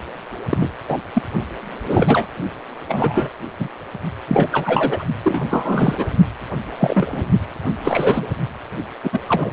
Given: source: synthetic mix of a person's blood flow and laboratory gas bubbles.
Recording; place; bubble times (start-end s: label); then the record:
Doppler ultrasound of blood flow; precordium
0.49-0.70 s: bubbles
0.88-0.97 s: bubbles
1.15-1.22 s: bubbles
1.85-2.26 s: bubbles
2.88-3.29 s: bubbles
3.59-3.68 s: bubbles
4.28-5.05 s: bubbles
5.24-6.06 s: bubbles
6.78-7.23 s: bubbles
7.85-8.28 s: bubbles
9.04-9.09 s: bubbles
9.12-9.20 s: bubbles
9.28-9.51 s: bubbles
From the record:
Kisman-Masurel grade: 243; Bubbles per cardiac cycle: several, 3 to 8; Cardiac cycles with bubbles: 100%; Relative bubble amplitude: loud (0.450 to 0.775); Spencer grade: 3 (all of the cardiac periods contain showers or single bubble signals, but not dominating or overriding the cardiac motion signals); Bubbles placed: only in the low amplitude regions of the cardiac cycle